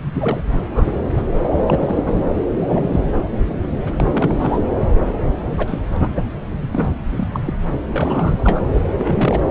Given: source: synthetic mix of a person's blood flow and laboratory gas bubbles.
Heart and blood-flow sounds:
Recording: Doppler ultrasound of blood flow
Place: subclavian vein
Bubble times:
0.13-0.41 s: bubbles
0.65-1.14 s: bubbles
1.17-1.23 s: bubbles
1.44-1.48 s: bubbles
1.57-1.62 s: bubbles
1.67-2.03 s: bubbles
2.06-2.21 s: bubbles
2.68-2.90 s: bubbles
2.92-3.12 s: bubbles
3.86-3.91 s: bubbles
4.00-4.59 s: bubbles
5.58-5.79 s: bubbles
5.96-6.08 s: bubbles
6.16-6.25 s: bubbles
6.50-6.69 s: bubbles
6.72-6.88 s: bubbles
7.11-7.28 s: bubbles
7.32-7.40 s: bubbles
7.45-7.54 s: bubbles
7.94-8.60 s: bubbles
8.96-9.51 s: bubbles
From the record:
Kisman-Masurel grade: 242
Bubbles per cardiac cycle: several, 3 to 8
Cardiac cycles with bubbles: 100%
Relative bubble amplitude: moderate (0.250 to 0.450)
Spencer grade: 3 (all of the cardiac periods contain showers or single bubble signals, but not dominating or overriding the cardiac motion signals)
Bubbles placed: anywhere in the cardiac cycle

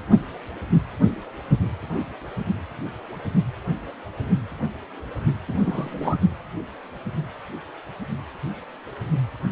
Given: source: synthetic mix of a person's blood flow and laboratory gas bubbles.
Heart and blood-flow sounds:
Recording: Doppler ultrasound of blood flow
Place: precordium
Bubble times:
5.47-6.16 s: bubbles
From the record:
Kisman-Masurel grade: 211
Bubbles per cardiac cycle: several, 3 to 8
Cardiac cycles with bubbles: 1 to 10%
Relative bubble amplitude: barely perceptible (0.100 to 0.250)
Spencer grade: 1 (occasional bubble signal discernible with the cardiac motion signal, with majority of cardiac periods free of bubbles)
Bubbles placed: only in the low amplitude regions of the cardiac cycle

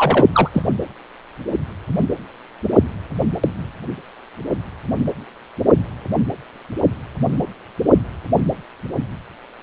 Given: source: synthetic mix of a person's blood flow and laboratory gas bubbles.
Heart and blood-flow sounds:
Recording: Doppler ultrasound of blood flow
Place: precordium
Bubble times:
0.00-0.26 s: bubbles
0.32-0.50 s: bubbles
0.54-0.63 s: bubbles
From the record:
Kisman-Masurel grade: 213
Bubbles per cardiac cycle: several, 3 to 8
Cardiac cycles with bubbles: 1 to 10%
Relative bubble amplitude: loud (0.450 to 0.775)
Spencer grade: 1 (occasional bubble signal discernible with the cardiac motion signal, with majority of cardiac periods free of bubbles)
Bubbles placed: anywhere in the cardiac cycle

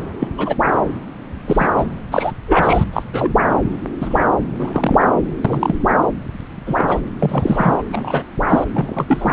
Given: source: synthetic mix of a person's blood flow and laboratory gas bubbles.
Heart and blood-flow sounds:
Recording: Doppler ultrasound of blood flow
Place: subclavian vein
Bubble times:
0.20-0.28 s: bubbles
0.38-0.55 s: bubbles
1.47-1.68 s: bubbles
1.77-1.84 s: bubbles
2.11-2.32 s: bubbles
2.47-2.84 s: bubbles
2.93-3.03 s: bubbles
3.12-3.33 s: bubbles
4.00-4.28 s: bubbles
4.59-5.06 s: bubbles
5.45-5.75 s: bubbles
6.67-6.75 s: bubbles
6.78-7.00 s: bubbles
7.20-7.83 s: bubbles
7.92-8.23 s: bubbles
8.48-8.64 s: bubbles
8.71-9.33 s: bubbles
From the record:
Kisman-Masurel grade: 233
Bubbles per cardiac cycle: several, 3 to 8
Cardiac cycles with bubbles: 50 to 99%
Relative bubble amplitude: loud (0.450 to 0.775)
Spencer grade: 3 (all of the cardiac periods contain showers or single bubble signals, but not dominating or overriding the cardiac motion signals)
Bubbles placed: anywhere in the cardiac cycle

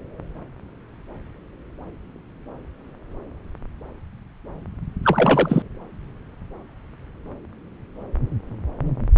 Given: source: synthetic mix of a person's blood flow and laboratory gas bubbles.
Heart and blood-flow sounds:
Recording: Doppler ultrasound of blood flow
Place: subclavian vein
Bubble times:
5.03-5.62 s: bubbles
From the record:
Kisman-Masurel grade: 213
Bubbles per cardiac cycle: several, 3 to 8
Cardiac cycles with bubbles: 1 to 10%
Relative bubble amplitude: loud (0.450 to 0.775)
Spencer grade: 1 (occasional bubble signal discernible with the cardiac motion signal, with majority of cardiac periods free of bubbles)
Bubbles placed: anywhere in the cardiac cycle

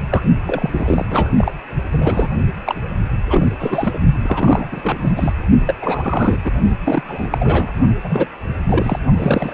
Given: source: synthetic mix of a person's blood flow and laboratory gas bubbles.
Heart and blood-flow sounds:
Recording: Doppler ultrasound of blood flow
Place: precordium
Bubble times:
0.11-0.23 s: bubbles
0.47-1.05 s: bubbles
1.10-1.30 s: bubbles
1.37-1.54 s: bubbles
1.92-2.28 s: bubbles
2.64-2.75 s: bubbles
3.27-3.99 s: bubbles
4.22-4.67 s: bubbles
4.72-4.97 s: bubbles
5.00-5.10 s: bubbles
5.16-5.32 s: bubbles
5.67-5.75 s: bubbles
5.82-6.38 s: bubbles
6.44-6.51 s: bubbles
6.84-7.03 s: bubbles
7.08-7.72 s: bubbles
8.04-8.27 s: bubbles
8.67-8.99 s: bubbles
9.19-9.54 s: bubbles
From the record:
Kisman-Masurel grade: 342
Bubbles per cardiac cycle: rolling drumbeat, 9 or more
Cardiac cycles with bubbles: 100%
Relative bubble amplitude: moderate (0.250 to 0.450)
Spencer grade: 3 (all of the cardiac periods contain showers or single bubble signals, but not dominating or overriding the cardiac motion signals)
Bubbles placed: only in the low amplitude regions of the cardiac cycle

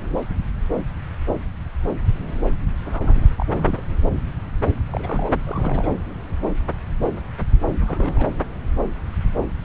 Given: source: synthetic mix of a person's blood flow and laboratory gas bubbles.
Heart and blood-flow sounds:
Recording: Doppler ultrasound of blood flow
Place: subclavian vein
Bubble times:
2.85-3.30 s: bubbles
3.38-3.45 s: bubbles
3.49-3.83 s: bubbles
4.88-5.30 s: bubbles
5.44-5.96 s: bubbles
7.71-7.76 s: bubbles
7.79-8.27 s: bubbles
From the record:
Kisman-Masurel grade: 221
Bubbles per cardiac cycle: several, 3 to 8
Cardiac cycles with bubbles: 10 to 50%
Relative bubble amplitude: barely perceptible (0.100 to 0.250)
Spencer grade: 2 (many but less than half of the cardiac periods contain bubble signals, singularly or in groups)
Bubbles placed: anywhere in the cardiac cycle

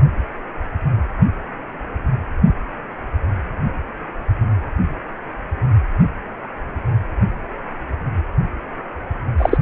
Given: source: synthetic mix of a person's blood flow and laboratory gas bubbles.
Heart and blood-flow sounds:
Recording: Doppler ultrasound of blood flow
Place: precordium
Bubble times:
9.38-9.59 s: bubbles
From the record:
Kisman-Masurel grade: 213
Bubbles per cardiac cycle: several, 3 to 8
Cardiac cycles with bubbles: 1 to 10%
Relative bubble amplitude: loud (0.450 to 0.775)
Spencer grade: 1 (occasional bubble signal discernible with the cardiac motion signal, with majority of cardiac periods free of bubbles)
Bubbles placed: anywhere in the cardiac cycle

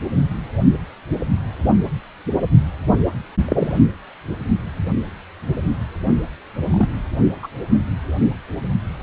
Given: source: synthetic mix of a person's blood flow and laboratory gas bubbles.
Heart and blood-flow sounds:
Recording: Doppler ultrasound of blood flow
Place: precordium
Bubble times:
3.48-3.74 s: bubbles
6.66-6.89 s: bubbles
7.42-7.47 s: bubbles
From the record:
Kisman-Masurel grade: 122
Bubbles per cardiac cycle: 1 to 2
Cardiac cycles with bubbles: 10 to 50%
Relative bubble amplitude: moderate (0.250 to 0.450)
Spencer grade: 2 (many but less than half of the cardiac periods contain bubble signals, singularly or in groups)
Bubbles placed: only in the low amplitude regions of the cardiac cycle

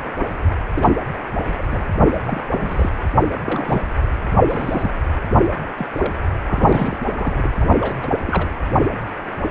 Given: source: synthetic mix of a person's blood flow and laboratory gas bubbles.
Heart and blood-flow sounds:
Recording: Doppler ultrasound of blood flow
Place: precordium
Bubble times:
0.75-0.91 s: bubbles
1.57-1.66 s: bubbles
1.71-1.84 s: bubbles
2.12-2.20 s: bubbles
2.26-2.42 s: bubbles
2.53-2.90 s: bubbles
3.45-3.83 s: bubbles
4.49-4.90 s: bubbles
5.77-5.87 s: bubbles
5.94-6.13 s: bubbles
6.49-6.97 s: bubbles
7.02-7.49 s: bubbles
7.59-7.71 s: bubbles
7.74-7.97 s: bubbles
8.02-8.08 s: bubbles
8.27-8.48 s: bubbles
From the record:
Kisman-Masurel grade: 232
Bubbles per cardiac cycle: several, 3 to 8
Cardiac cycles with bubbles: 50 to 99%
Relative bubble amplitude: moderate (0.250 to 0.450)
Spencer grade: 3 (all of the cardiac periods contain showers or single bubble signals, but not dominating or overriding the cardiac motion signals)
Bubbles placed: anywhere in the cardiac cycle

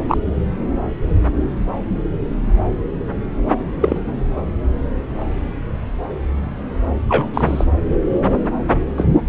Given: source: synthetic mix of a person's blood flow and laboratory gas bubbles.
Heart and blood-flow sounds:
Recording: Doppler ultrasound of blood flow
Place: subclavian vein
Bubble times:
0.08-0.17 s: bubbles
3.80-3.98 s: bubbles
7.08-7.29 s: bubbles
7.34-7.64 s: bubbles
8.97-9.04 s: bubbles
From the record:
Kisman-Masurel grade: 123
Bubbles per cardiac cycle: 1 to 2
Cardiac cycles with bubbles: 10 to 50%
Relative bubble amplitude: loud (0.450 to 0.775)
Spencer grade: 2 (many but less than half of the cardiac periods contain bubble signals, singularly or in groups)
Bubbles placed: anywhere in the cardiac cycle

